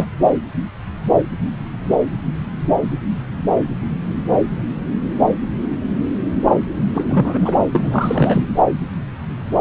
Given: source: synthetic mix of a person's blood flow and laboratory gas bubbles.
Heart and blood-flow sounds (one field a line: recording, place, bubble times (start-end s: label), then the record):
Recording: Doppler ultrasound of blood flow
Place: subclavian vein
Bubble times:
0.00-0.05 s: bubbles
6.93-7.54 s: bubbles
7.72-8.45 s: bubbles
From the record:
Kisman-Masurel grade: 223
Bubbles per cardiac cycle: several, 3 to 8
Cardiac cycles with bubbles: 10 to 50%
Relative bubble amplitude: loud (0.450 to 0.775)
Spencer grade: 2 (many but less than half of the cardiac periods contain bubble signals, singularly or in groups)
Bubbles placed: anywhere in the cardiac cycle